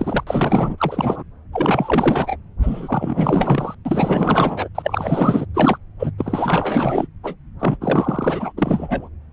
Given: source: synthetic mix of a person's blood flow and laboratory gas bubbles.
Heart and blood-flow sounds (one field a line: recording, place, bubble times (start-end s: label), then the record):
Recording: Doppler ultrasound of blood flow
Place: subclavian vein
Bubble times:
0.00-0.23 s: bubbles
0.27-1.23 s: bubbles
1.52-2.37 s: bubbles
2.62-3.75 s: bubbles
3.85-4.68 s: bubbles
4.75-5.46 s: bubbles
5.54-5.77 s: bubbles
5.99-6.11 s: bubbles
6.18-7.07 s: bubbles
7.23-7.35 s: bubbles
7.59-7.76 s: bubbles
7.80-8.52 s: bubbles
8.57-9.09 s: bubbles
From the record:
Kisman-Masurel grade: 444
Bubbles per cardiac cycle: continuous sound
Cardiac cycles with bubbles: 100%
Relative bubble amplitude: maximal (0.775 to 0.999)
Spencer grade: 4 (maximum detectable bubble signal sounding continuously throughout systole and diastole of every cardiac period, and overriding the amplitude of the normal cardiac signals)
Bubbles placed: anywhere in the cardiac cycle